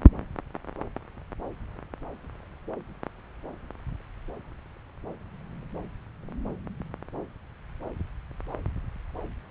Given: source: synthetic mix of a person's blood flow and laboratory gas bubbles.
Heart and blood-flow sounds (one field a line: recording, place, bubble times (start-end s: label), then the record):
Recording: Doppler ultrasound of blood flow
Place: subclavian vein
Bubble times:
no bubbles
From the record:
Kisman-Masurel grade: 000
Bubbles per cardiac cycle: 0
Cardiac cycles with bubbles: 0%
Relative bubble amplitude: no bubbles discernible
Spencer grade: 0 (complete lack of bubble signals)